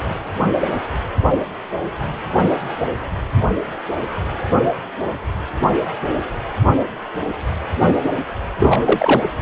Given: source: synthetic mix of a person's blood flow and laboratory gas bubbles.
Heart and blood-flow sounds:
Doppler ultrasound of blood flow; precordium
8.58-9.22 s: bubbles
From the record:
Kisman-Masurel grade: 213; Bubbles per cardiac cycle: several, 3 to 8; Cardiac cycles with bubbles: 1 to 10%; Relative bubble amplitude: loud (0.450 to 0.775); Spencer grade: 1 (occasional bubble signal discernible with the cardiac motion signal, with majority of cardiac periods free of bubbles); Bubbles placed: anywhere in the cardiac cycle

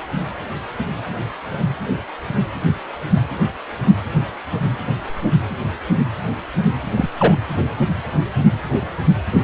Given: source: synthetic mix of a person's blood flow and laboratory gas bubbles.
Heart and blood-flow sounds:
Doppler ultrasound of blood flow; precordium
6.96-7.08 s: bubbles
7.17-7.35 s: bubbles
From the record:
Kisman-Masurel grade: 113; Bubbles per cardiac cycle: 1 to 2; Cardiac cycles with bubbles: 1 to 10%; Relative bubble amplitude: loud (0.450 to 0.775); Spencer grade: 1 (occasional bubble signal discernible with the cardiac motion signal, with majority of cardiac periods free of bubbles); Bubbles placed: anywhere in the cardiac cycle

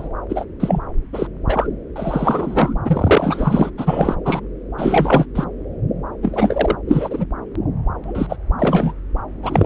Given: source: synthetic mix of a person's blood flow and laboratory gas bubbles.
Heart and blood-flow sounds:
Doppler ultrasound of blood flow; subclavian vein
0.00-0.08 s: bubbles
0.28-0.45 s: bubbles
0.59-0.79 s: bubbles
1.12-1.27 s: bubbles
1.47-1.68 s: bubbles
1.96-2.73 s: bubbles
2.84-3.71 s: bubbles
3.77-4.15 s: bubbles
4.25-4.40 s: bubbles
4.78-5.26 s: bubbles
5.35-5.45 s: bubbles
6.22-6.76 s: bubbles
6.88-7.26 s: bubbles
8.04-8.26 s: bubbles
8.29-8.37 s: bubbles
8.58-8.92 s: bubbles
9.41-9.66 s: bubbles
From the record:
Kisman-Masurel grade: 343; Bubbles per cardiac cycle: rolling drumbeat, 9 or more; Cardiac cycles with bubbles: 100%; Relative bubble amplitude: loud (0.450 to 0.775); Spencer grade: 3 (all of the cardiac periods contain showers or single bubble signals, but not dominating or overriding the cardiac motion signals); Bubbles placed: anywhere in the cardiac cycle

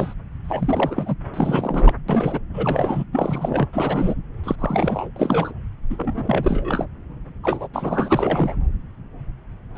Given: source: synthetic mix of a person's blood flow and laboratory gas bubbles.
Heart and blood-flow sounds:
Doppler ultrasound of blood flow; subclavian vein
0.00-0.14 s: bubbles
0.44-1.16 s: bubbles
1.33-1.93 s: bubbles
2.08-2.39 s: bubbles
2.53-3.04 s: bubbles
3.11-3.69 s: bubbles
3.73-4.15 s: bubbles
4.44-4.56 s: bubbles
4.58-5.10 s: bubbles
5.16-5.53 s: bubbles
5.90-6.85 s: bubbles
7.43-7.68 s: bubbles
7.73-8.54 s: bubbles
9.75-9.78 s: bubbles
From the record:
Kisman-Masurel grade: 332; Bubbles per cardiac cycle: rolling drumbeat, 9 or more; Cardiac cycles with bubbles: 50 to 99%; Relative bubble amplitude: moderate (0.250 to 0.450); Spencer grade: 3 (all of the cardiac periods contain showers or single bubble signals, but not dominating or overriding the cardiac motion signals); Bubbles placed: anywhere in the cardiac cycle

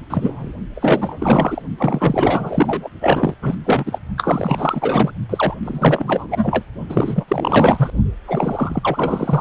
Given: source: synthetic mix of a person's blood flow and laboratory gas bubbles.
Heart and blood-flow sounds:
Doppler ultrasound of blood flow; precordium
0.09-0.53 s: bubbles
0.75-1.62 s: bubbles
1.77-2.89 s: bubbles
3.00-3.34 s: bubbles
3.42-3.55 s: bubbles
3.64-3.99 s: bubbles
4.17-5.11 s: bubbles
5.29-5.55 s: bubbles
5.63-6.64 s: bubbles
6.89-7.25 s: bubbles
7.28-7.90 s: bubbles
8.26-9.41 s: bubbles
From the record:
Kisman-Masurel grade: 444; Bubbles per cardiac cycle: continuous sound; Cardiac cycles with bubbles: 100%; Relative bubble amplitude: maximal (0.775 to 0.999); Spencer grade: 4 (maximum detectable bubble signal sounding continuously throughout systole and diastole of every cardiac period, and overriding the amplitude of the normal cardiac signals); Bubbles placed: only in the low amplitude regions of the cardiac cycle

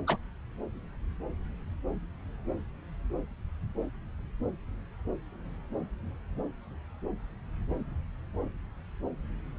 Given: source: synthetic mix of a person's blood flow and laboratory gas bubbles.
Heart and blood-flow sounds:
Doppler ultrasound of blood flow; subclavian vein
0.07-0.18 s: bubbles
From the record:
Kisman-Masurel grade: 221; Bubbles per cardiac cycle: several, 3 to 8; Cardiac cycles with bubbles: 10 to 50%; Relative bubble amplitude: barely perceptible (0.100 to 0.250); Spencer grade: 2 (many but less than half of the cardiac periods contain bubble signals, singularly or in groups); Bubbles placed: anywhere in the cardiac cycle

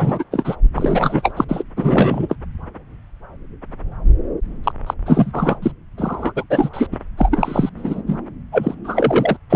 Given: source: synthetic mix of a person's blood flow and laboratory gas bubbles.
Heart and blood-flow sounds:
Doppler ultrasound of blood flow; subclavian vein
0.00-0.24 s: bubbles
0.32-0.56 s: bubbles
0.75-1.33 s: bubbles
1.36-1.45 s: bubbles
1.49-1.63 s: bubbles
1.76-2.35 s: bubbles
4.63-4.72 s: bubbles
4.86-4.94 s: bubbles
5.05-5.58 s: bubbles
5.62-5.71 s: bubbles
5.97-6.32 s: bubbles
6.36-6.44 s: bubbles
6.50-6.70 s: bubbles
6.73-6.87 s: bubbles
6.92-6.97 s: bubbles
7.17-7.70 s: bubbles
7.77-8.02 s: bubbles
8.06-8.21 s: bubbles
8.52-8.74 s: bubbles
8.84-9.37 s: bubbles
9.49-9.56 s: bubbles
From the record:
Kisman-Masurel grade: 333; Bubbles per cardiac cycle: rolling drumbeat, 9 or more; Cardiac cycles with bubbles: 50 to 99%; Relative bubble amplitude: loud (0.450 to 0.775); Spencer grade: 3 (all of the cardiac periods contain showers or single bubble signals, but not dominating or overriding the cardiac motion signals); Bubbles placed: anywhere in the cardiac cycle

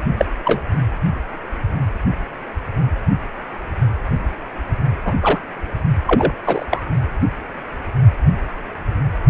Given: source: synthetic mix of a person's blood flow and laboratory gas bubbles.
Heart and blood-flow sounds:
Doppler ultrasound of blood flow; precordium
0.17-0.25 s: bubbles
0.45-0.62 s: bubbles
5.04-5.13 s: bubbles
5.22-5.40 s: bubbles
6.06-6.32 s: bubbles
6.44-6.66 s: bubbles
6.70-6.81 s: bubbles
From the record:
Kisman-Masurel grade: 223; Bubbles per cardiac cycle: several, 3 to 8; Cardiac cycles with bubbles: 10 to 50%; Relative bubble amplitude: loud (0.450 to 0.775); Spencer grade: 2 (many but less than half of the cardiac periods contain bubble signals, singularly or in groups); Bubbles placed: only in the low amplitude regions of the cardiac cycle

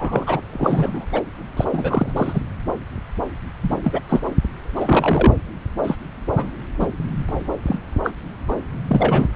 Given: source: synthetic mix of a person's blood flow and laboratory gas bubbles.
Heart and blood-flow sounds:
Doppler ultrasound of blood flow; subclavian vein
0.00-0.41 s: bubbles
0.52-1.06 s: bubbles
1.12-1.22 s: bubbles
1.56-1.65 s: bubbles
1.73-2.12 s: bubbles
2.16-2.42 s: bubbles
3.63-3.80 s: bubbles
3.84-3.99 s: bubbles
4.08-4.20 s: bubbles
4.75-5.33 s: bubbles
5.83-5.96 s: bubbles
6.36-6.51 s: bubbles
6.80-6.88 s: bubbles
7.29-7.33 s: bubbles
7.67-7.79 s: bubbles
8.04-8.12 s: bubbles
8.48-8.55 s: bubbles
8.87-9.29 s: bubbles
From the record:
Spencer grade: 3 (all of the cardiac periods contain showers or single bubble signals, but not dominating or overriding the cardiac motion signals); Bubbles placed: anywhere in the cardiac cycle

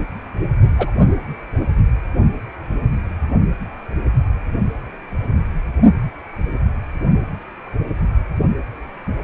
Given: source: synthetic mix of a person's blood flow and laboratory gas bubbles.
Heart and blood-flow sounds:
Doppler ultrasound of blood flow; precordium
0.78-0.91 s: bubbles
From the record:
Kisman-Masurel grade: 113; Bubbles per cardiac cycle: 1 to 2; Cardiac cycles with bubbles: 1 to 10%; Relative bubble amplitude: loud (0.450 to 0.775); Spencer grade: 1 (occasional bubble signal discernible with the cardiac motion signal, with majority of cardiac periods free of bubbles); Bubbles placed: only in the low amplitude regions of the cardiac cycle

